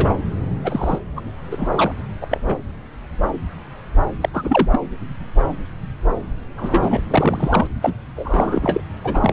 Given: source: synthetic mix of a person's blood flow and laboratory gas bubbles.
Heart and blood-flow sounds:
Doppler ultrasound of blood flow; subclavian vein
0.00-0.14 s: bubbles
0.64-0.99 s: bubbles
1.16-1.21 s: bubbles
1.51-1.68 s: bubbles
1.71-1.92 s: bubbles
2.21-2.27 s: bubbles
2.30-2.40 s: bubbles
2.46-2.56 s: bubbles
4.21-4.29 s: bubbles
4.33-4.68 s: bubbles
4.72-4.80 s: bubbles
6.57-7.01 s: bubbles
7.10-7.67 s: bubbles
7.81-7.93 s: bubbles
8.16-8.81 s: bubbles
9.04-9.33 s: bubbles
From the record:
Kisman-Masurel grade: 232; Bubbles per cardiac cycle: several, 3 to 8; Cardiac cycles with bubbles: 50 to 99%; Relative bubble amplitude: moderate (0.250 to 0.450); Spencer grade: 3 (all of the cardiac periods contain showers or single bubble signals, but not dominating or overriding the cardiac motion signals); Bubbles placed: anywhere in the cardiac cycle

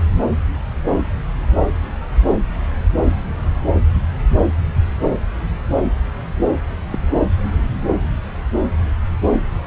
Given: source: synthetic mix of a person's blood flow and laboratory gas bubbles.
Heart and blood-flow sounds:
Doppler ultrasound of blood flow; subclavian vein
6.91-6.99 s: bubbles
From the record:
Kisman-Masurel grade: 112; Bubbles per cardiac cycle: 1 to 2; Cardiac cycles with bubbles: 1 to 10%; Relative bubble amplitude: moderate (0.250 to 0.450); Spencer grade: 1 (occasional bubble signal discernible with the cardiac motion signal, with majority of cardiac periods free of bubbles); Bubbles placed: anywhere in the cardiac cycle

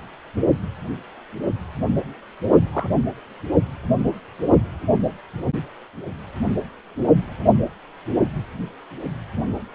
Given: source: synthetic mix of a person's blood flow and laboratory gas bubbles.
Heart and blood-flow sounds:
Doppler ultrasound of blood flow; precordium
2.73-2.90 s: bubbles
From the record:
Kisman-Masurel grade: 111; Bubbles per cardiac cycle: 1 to 2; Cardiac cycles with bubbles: 1 to 10%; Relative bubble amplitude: barely perceptible (0.100 to 0.250); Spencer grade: 1 (occasional bubble signal discernible with the cardiac motion signal, with majority of cardiac periods free of bubbles); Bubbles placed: only in the low amplitude regions of the cardiac cycle

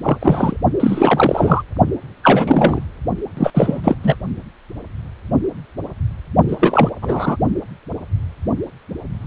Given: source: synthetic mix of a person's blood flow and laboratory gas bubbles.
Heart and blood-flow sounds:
Doppler ultrasound of blood flow; precordium
0.03-0.18 s: bubbles
0.21-0.57 s: bubbles
0.79-1.62 s: bubbles
2.23-2.86 s: bubbles
3.37-3.50 s: bubbles
3.54-3.96 s: bubbles
4.03-4.16 s: bubbles
6.47-6.89 s: bubbles
7.01-7.37 s: bubbles
From the record:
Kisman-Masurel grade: 333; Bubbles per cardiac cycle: rolling drumbeat, 9 or more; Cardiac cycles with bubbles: 50 to 99%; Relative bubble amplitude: loud (0.450 to 0.775); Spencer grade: 3 (all of the cardiac periods contain showers or single bubble signals, but not dominating or overriding the cardiac motion signals); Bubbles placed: only in the low amplitude regions of the cardiac cycle

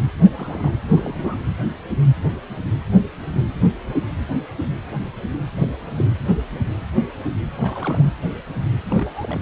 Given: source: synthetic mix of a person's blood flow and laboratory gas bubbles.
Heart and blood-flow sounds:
Doppler ultrasound of blood flow; precordium
0.24-0.29 s: bubbles
0.36-0.74 s: bubbles
0.94-1.37 s: bubbles
5.52-5.76 s: bubbles
5.94-6.05 s: bubbles
7.55-8.05 s: bubbles
8.89-9.39 s: bubbles
From the record:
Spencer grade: 2 (many but less than half of the cardiac periods contain bubble signals, singularly or in groups); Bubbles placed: anywhere in the cardiac cycle

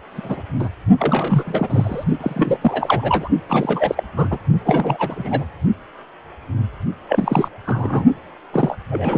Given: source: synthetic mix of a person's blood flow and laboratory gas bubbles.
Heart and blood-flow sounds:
Doppler ultrasound of blood flow; precordium
0.10-0.41 s: bubbles
0.59-0.69 s: bubbles
0.98-2.04 s: bubbles
2.21-3.29 s: bubbles
3.49-4.04 s: bubbles
4.16-4.38 s: bubbles
4.66-5.46 s: bubbles
7.08-7.48 s: bubbles
7.66-8.05 s: bubbles
8.53-8.76 s: bubbles
8.90-9.18 s: bubbles
From the record:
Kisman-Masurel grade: 332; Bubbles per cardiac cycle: rolling drumbeat, 9 or more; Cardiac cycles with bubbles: 50 to 99%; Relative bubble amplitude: moderate (0.250 to 0.450); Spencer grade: 3 (all of the cardiac periods contain showers or single bubble signals, but not dominating or overriding the cardiac motion signals); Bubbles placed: only in the low amplitude regions of the cardiac cycle

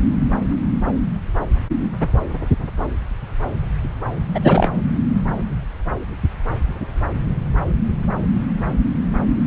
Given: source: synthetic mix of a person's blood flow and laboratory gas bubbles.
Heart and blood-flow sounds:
Doppler ultrasound of blood flow; subclavian vein
4.34-4.40 s: bubbles
4.42-4.71 s: bubbles
From the record:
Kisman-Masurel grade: 213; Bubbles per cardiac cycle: several, 3 to 8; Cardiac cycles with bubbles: 1 to 10%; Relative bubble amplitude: loud (0.450 to 0.775); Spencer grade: 1 (occasional bubble signal discernible with the cardiac motion signal, with majority of cardiac periods free of bubbles); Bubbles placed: anywhere in the cardiac cycle

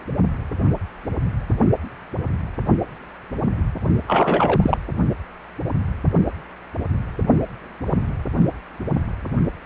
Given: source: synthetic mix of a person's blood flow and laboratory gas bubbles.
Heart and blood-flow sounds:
Doppler ultrasound of blood flow; precordium
4.08-4.77 s: bubbles
From the record:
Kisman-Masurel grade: 212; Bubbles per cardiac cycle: several, 3 to 8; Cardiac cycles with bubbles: 1 to 10%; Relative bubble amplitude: moderate (0.250 to 0.450); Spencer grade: 1 (occasional bubble signal discernible with the cardiac motion signal, with majority of cardiac periods free of bubbles); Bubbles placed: only in the low amplitude regions of the cardiac cycle

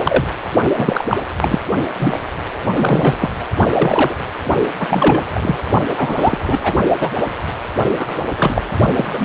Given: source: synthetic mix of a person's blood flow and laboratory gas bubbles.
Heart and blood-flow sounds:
Doppler ultrasound of blood flow; precordium
0.04-0.24 s: bubbles
0.76-1.04 s: bubbles
1.08-1.17 s: bubbles
1.41-1.59 s: bubbles
1.99-2.19 s: bubbles
2.76-3.29 s: bubbles
3.74-4.15 s: bubbles
4.79-5.22 s: bubbles
5.34-5.58 s: bubbles
5.96-6.74 s: bubbles
7.00-7.10 s: bubbles
7.97-8.25 s: bubbles
8.38-8.62 s: bubbles
8.96-9.06 s: bubbles
9.13-9.25 s: bubbles
From the record:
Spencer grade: 3 (all of the cardiac periods contain showers or single bubble signals, but not dominating or overriding the cardiac motion signals); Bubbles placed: only in the low amplitude regions of the cardiac cycle

